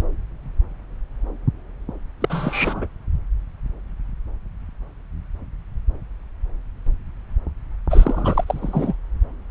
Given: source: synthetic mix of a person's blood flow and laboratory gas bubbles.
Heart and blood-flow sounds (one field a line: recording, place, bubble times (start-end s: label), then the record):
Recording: Doppler ultrasound of blood flow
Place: subclavian vein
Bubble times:
2.21-2.87 s: bubbles
7.90-8.44 s: bubbles
8.46-8.95 s: bubbles
From the record:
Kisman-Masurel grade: 222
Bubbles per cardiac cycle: several, 3 to 8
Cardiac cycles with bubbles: 10 to 50%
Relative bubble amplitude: moderate (0.250 to 0.450)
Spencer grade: 2 (many but less than half of the cardiac periods contain bubble signals, singularly or in groups)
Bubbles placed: anywhere in the cardiac cycle